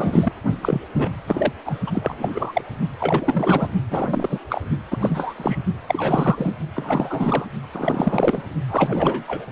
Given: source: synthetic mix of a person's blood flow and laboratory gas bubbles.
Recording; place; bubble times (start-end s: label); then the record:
Doppler ultrasound of blood flow; precordium
0.00-0.32 s: bubbles
0.62-0.81 s: bubbles
0.98-1.09 s: bubbles
1.27-1.52 s: bubbles
1.66-1.78 s: bubbles
1.87-2.62 s: bubbles
3.00-3.68 s: bubbles
3.90-4.39 s: bubbles
4.49-4.61 s: bubbles
4.90-5.34 s: bubbles
5.38-5.59 s: bubbles
5.88-6.52 s: bubbles
6.75-7.46 s: bubbles
7.73-8.42 s: bubbles
8.70-9.24 s: bubbles
9.28-9.45 s: bubbles
From the record:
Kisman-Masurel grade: 342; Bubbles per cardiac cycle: rolling drumbeat, 9 or more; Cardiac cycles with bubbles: 100%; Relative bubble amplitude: moderate (0.250 to 0.450); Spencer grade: 3 (all of the cardiac periods contain showers or single bubble signals, but not dominating or overriding the cardiac motion signals); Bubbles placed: only in the low amplitude regions of the cardiac cycle